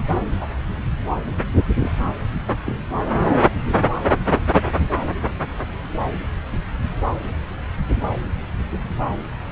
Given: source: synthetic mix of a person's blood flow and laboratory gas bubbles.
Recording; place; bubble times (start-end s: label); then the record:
Doppler ultrasound of blood flow; subclavian vein
0.40-0.46 s: bubbles
1.78-1.92 s: bubbles
2.65-2.75 s: bubbles
From the record:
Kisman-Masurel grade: 122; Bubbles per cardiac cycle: 1 to 2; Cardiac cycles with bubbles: 10 to 50%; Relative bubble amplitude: moderate (0.250 to 0.450); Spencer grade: 2 (many but less than half of the cardiac periods contain bubble signals, singularly or in groups); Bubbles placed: anywhere in the cardiac cycle